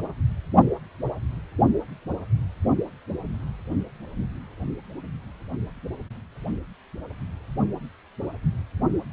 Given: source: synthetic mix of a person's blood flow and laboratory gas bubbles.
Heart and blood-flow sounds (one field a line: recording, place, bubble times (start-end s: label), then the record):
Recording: Doppler ultrasound of blood flow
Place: precordium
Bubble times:
no bubbles
From the record:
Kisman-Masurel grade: 000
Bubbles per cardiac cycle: 0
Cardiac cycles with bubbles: 0%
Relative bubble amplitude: no bubbles discernible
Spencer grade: 0 (complete lack of bubble signals)